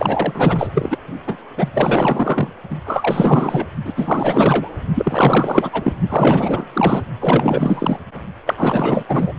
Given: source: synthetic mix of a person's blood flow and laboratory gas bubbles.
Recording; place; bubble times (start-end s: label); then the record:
Doppler ultrasound of blood flow; precordium
0.00-0.70 s: bubbles
0.75-0.99 s: bubbles
1.27-1.38 s: bubbles
1.56-1.69 s: bubbles
1.73-2.50 s: bubbles
2.70-2.77 s: bubbles
2.85-3.67 s: bubbles
3.85-3.93 s: bubbles
3.97-4.70 s: bubbles
4.94-5.93 s: bubbles
6.08-6.65 s: bubbles
6.73-7.02 s: bubbles
7.20-7.97 s: bubbles
8.46-8.54 s: bubbles
8.57-9.04 s: bubbles
9.09-9.33 s: bubbles
From the record:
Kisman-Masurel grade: 444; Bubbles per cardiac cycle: continuous sound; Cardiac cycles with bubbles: 100%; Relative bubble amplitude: maximal (0.775 to 0.999); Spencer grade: 4 (maximum detectable bubble signal sounding continuously throughout systole and diastole of every cardiac period, and overriding the amplitude of the normal cardiac signals); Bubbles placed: only in the low amplitude regions of the cardiac cycle